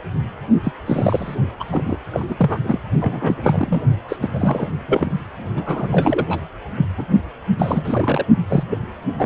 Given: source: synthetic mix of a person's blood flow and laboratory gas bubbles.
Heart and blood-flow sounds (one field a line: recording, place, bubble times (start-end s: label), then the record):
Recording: Doppler ultrasound of blood flow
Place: precordium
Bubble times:
0.63-0.72 s: bubbles
0.85-1.35 s: bubbles
1.59-1.64 s: bubbles
1.71-1.96 s: bubbles
2.13-2.25 s: bubbles
2.29-2.60 s: bubbles
2.63-2.79 s: bubbles
3.00-3.81 s: bubbles
4.08-4.16 s: bubbles
4.21-4.29 s: bubbles
4.33-4.69 s: bubbles
4.88-5.15 s: bubbles
5.54-6.40 s: bubbles
6.77-6.87 s: bubbles
6.97-7.04 s: bubbles
7.58-8.26 s: bubbles
8.49-8.63 s: bubbles
8.70-8.78 s: bubbles
9.02-9.04 s: bubbles
9.19-9.26 s: bubbles
From the record:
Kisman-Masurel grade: 343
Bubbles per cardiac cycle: rolling drumbeat, 9 or more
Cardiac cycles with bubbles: 100%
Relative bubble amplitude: loud (0.450 to 0.775)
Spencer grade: 3 (all of the cardiac periods contain showers or single bubble signals, but not dominating or overriding the cardiac motion signals)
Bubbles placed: anywhere in the cardiac cycle